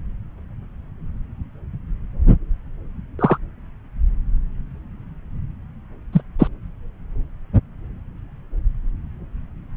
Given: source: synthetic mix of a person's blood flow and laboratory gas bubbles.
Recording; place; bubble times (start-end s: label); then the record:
Doppler ultrasound of blood flow; subclavian vein
3.19-3.38 s: bubbles
6.12-6.21 s: bubbles
6.38-6.47 s: bubbles
From the record:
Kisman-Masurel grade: 123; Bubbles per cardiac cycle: 1 to 2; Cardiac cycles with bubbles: 10 to 50%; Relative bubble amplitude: loud (0.450 to 0.775); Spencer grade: 2 (many but less than half of the cardiac periods contain bubble signals, singularly or in groups); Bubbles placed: anywhere in the cardiac cycle